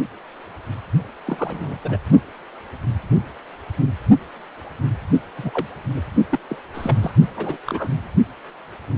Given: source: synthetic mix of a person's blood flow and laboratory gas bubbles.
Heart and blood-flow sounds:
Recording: Doppler ultrasound of blood flow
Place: precordium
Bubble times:
1.27-1.77 s: bubbles
1.84-1.98 s: bubbles
5.37-5.68 s: bubbles
5.96-6.01 s: bubbles
6.31-6.39 s: bubbles
6.49-6.56 s: bubbles
6.73-7.12 s: bubbles
7.37-7.57 s: bubbles
7.66-8.08 s: bubbles
From the record:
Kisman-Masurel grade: 221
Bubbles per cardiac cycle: several, 3 to 8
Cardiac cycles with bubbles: 10 to 50%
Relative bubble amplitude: barely perceptible (0.100 to 0.250)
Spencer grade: 2 (many but less than half of the cardiac periods contain bubble signals, singularly or in groups)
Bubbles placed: only in the low amplitude regions of the cardiac cycle

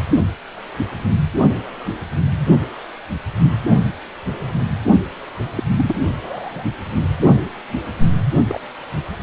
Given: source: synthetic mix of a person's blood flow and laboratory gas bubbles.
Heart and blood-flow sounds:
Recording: Doppler ultrasound of blood flow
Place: precordium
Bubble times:
5.56-5.63 s: bubbles
5.78-5.94 s: bubbles
6.21-6.65 s: bubbles
8.48-8.59 s: bubbles
From the record:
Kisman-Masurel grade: 122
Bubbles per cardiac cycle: 1 to 2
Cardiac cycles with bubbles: 10 to 50%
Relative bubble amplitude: moderate (0.250 to 0.450)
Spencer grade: 2 (many but less than half of the cardiac periods contain bubble signals, singularly or in groups)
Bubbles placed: only in the low amplitude regions of the cardiac cycle

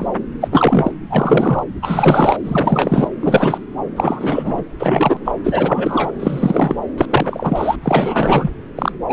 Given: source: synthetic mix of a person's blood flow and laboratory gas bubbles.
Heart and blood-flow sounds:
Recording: Doppler ultrasound of blood flow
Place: subclavian vein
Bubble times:
0.00-0.07 s: bubbles
0.41-0.48 s: bubbles
0.52-0.91 s: bubbles
1.10-1.64 s: bubbles
1.82-2.37 s: bubbles
2.44-3.08 s: bubbles
3.20-3.59 s: bubbles
3.96-4.64 s: bubbles
4.79-5.32 s: bubbles
5.44-6.12 s: bubbles
6.20-6.75 s: bubbles
6.98-7.06 s: bubbles
7.10-7.76 s: bubbles
7.82-8.50 s: bubbles
8.76-8.92 s: bubbles
9.08-9.13 s: bubbles
From the record:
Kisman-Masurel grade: 343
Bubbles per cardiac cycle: rolling drumbeat, 9 or more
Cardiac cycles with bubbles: 100%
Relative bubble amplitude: loud (0.450 to 0.775)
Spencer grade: 3 (all of the cardiac periods contain showers or single bubble signals, but not dominating or overriding the cardiac motion signals)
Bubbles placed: anywhere in the cardiac cycle

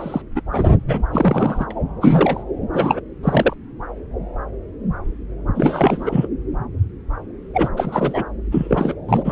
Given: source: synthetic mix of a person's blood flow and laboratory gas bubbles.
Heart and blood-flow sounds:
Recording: Doppler ultrasound of blood flow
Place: subclavian vein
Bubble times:
0.00-0.22 s: bubbles
0.35-0.41 s: bubbles
0.51-0.69 s: bubbles
0.87-1.03 s: bubbles
1.12-1.66 s: bubbles
1.71-1.74 s: bubbles
2.02-2.44 s: bubbles
2.73-3.00 s: bubbles
3.23-3.54 s: bubbles
5.55-6.28 s: bubbles
7.53-7.68 s: bubbles
7.76-8.25 s: bubbles
8.51-8.94 s: bubbles
9.08-9.32 s: bubbles
From the record:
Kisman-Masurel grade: 333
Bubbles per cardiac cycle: rolling drumbeat, 9 or more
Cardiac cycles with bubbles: 50 to 99%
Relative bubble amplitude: loud (0.450 to 0.775)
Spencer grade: 3 (all of the cardiac periods contain showers or single bubble signals, but not dominating or overriding the cardiac motion signals)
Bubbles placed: anywhere in the cardiac cycle

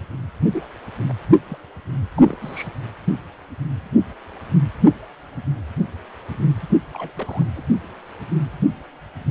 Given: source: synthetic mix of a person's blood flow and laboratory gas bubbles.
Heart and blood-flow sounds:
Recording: Doppler ultrasound of blood flow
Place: precordium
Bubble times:
0.52-0.67 s: bubbles
1.08-1.12 s: bubbles
1.48-1.58 s: bubbles
2.15-2.35 s: bubbles
2.42-2.68 s: bubbles
6.93-7.11 s: bubbles
7.17-7.46 s: bubbles
7.55-7.62 s: bubbles
From the record:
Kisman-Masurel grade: 221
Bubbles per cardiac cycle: several, 3 to 8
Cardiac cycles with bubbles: 10 to 50%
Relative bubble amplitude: barely perceptible (0.100 to 0.250)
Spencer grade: 2 (many but less than half of the cardiac periods contain bubble signals, singularly or in groups)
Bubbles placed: only in the low amplitude regions of the cardiac cycle

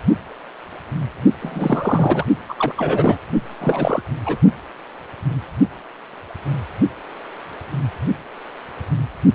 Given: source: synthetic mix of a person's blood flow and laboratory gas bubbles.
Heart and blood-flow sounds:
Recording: Doppler ultrasound of blood flow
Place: precordium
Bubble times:
1.40-2.24 s: bubbles
2.48-2.54 s: bubbles
2.59-2.73 s: bubbles
2.76-3.18 s: bubbles
3.60-4.04 s: bubbles
4.25-4.38 s: bubbles
From the record:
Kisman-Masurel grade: 223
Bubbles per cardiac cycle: several, 3 to 8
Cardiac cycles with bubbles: 10 to 50%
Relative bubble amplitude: loud (0.450 to 0.775)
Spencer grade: 2 (many but less than half of the cardiac periods contain bubble signals, singularly or in groups)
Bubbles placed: only in the low amplitude regions of the cardiac cycle

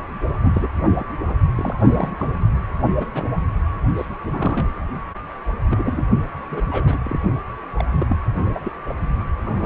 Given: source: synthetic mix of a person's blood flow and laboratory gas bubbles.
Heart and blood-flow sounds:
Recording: Doppler ultrasound of blood flow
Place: precordium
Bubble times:
0.45-0.69 s: bubbles
0.97-1.05 s: bubbles
1.28-1.34 s: bubbles
1.55-2.11 s: bubbles
2.19-2.27 s: bubbles
2.85-2.91 s: bubbles
2.99-3.10 s: bubbles
3.14-3.25 s: bubbles
3.97-4.05 s: bubbles
4.31-4.71 s: bubbles
5.70-6.02 s: bubbles
6.50-6.63 s: bubbles
6.67-6.99 s: bubbles
7.03-7.18 s: bubbles
7.76-7.85 s: bubbles
7.91-8.17 s: bubbles
8.45-8.60 s: bubbles
8.62-8.72 s: bubbles
8.86-8.93 s: bubbles
9.44-9.66 s: bubbles
From the record:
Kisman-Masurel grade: 242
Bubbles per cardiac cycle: several, 3 to 8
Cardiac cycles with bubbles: 100%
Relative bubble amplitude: moderate (0.250 to 0.450)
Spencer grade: 3 (all of the cardiac periods contain showers or single bubble signals, but not dominating or overriding the cardiac motion signals)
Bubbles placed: only in the low amplitude regions of the cardiac cycle

